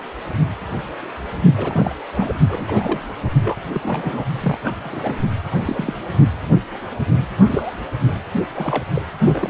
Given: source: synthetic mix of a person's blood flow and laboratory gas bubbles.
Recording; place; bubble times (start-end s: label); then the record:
Doppler ultrasound of blood flow; precordium
1.57-1.95 s: bubbles
2.14-2.35 s: bubbles
2.49-3.00 s: bubbles
3.45-3.56 s: bubbles
3.73-4.24 s: bubbles
4.40-4.56 s: bubbles
4.61-5.13 s: bubbles
5.51-5.93 s: bubbles
7.49-7.74 s: bubbles
8.04-8.20 s: bubbles
8.54-8.84 s: bubbles
8.95-9.05 s: bubbles
9.24-9.50 s: bubbles
From the record:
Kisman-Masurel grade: 232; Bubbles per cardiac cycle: several, 3 to 8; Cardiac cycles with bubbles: 50 to 99%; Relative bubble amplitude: moderate (0.250 to 0.450); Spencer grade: 3 (all of the cardiac periods contain showers or single bubble signals, but not dominating or overriding the cardiac motion signals); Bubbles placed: only in the low amplitude regions of the cardiac cycle